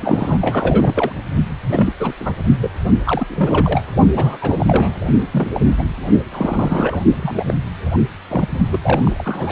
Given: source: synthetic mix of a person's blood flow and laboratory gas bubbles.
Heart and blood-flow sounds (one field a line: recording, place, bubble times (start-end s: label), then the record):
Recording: Doppler ultrasound of blood flow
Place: precordium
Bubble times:
0.00-0.39 s: bubbles
0.41-1.12 s: bubbles
1.69-1.93 s: bubbles
1.99-2.12 s: bubbles
2.19-2.33 s: bubbles
2.61-2.69 s: bubbles
3.05-3.27 s: bubbles
3.29-3.83 s: bubbles
4.15-4.38 s: bubbles
4.41-4.94 s: bubbles
5.32-5.65 s: bubbles
5.79-5.83 s: bubbles
6.32-7.04 s: bubbles
7.13-7.54 s: bubbles
7.93-7.98 s: bubbles
8.29-8.48 s: bubbles
8.71-8.79 s: bubbles
8.84-9.52 s: bubbles
From the record:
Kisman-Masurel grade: 342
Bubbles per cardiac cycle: rolling drumbeat, 9 or more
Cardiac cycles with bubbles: 100%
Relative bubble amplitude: moderate (0.250 to 0.450)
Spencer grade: 3 (all of the cardiac periods contain showers or single bubble signals, but not dominating or overriding the cardiac motion signals)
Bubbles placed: only in the low amplitude regions of the cardiac cycle